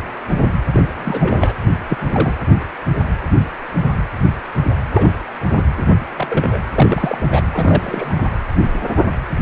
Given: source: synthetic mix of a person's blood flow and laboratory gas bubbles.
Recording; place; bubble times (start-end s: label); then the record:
Doppler ultrasound of blood flow; precordium
0.72-0.83 s: bubbles
0.98-1.54 s: bubbles
1.89-1.98 s: bubbles
2.08-2.32 s: bubbles
4.92-5.11 s: bubbles
5.46-5.63 s: bubbles
5.77-5.82 s: bubbles
6.16-6.59 s: bubbles
6.74-7.42 s: bubbles
7.51-8.26 s: bubbles
From the record:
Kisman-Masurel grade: 222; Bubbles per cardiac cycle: several, 3 to 8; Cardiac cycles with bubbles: 10 to 50%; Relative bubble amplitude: moderate (0.250 to 0.450); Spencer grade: 2 (many but less than half of the cardiac periods contain bubble signals, singularly or in groups); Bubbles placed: anywhere in the cardiac cycle